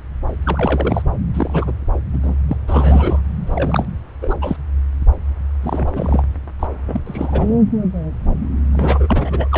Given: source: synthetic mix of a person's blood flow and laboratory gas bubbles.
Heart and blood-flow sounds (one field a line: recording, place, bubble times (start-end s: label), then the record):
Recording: Doppler ultrasound of blood flow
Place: subclavian vein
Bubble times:
0.45-1.02 s: bubbles
1.33-1.72 s: bubbles
2.14-2.18 s: bubbles
2.23-2.38 s: bubbles
2.49-2.57 s: bubbles
2.68-3.22 s: bubbles
3.46-3.85 s: bubbles
4.21-4.35 s: bubbles
4.42-4.57 s: bubbles
5.62-5.91 s: bubbles
5.94-6.23 s: bubbles
6.59-6.67 s: bubbles
6.88-7.00 s: bubbles
7.06-7.62 s: bubbles
8.71-9.58 s: bubbles
From the record:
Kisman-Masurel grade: 332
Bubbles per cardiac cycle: rolling drumbeat, 9 or more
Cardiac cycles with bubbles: 50 to 99%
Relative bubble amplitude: moderate (0.250 to 0.450)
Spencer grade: 3 (all of the cardiac periods contain showers or single bubble signals, but not dominating or overriding the cardiac motion signals)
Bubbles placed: anywhere in the cardiac cycle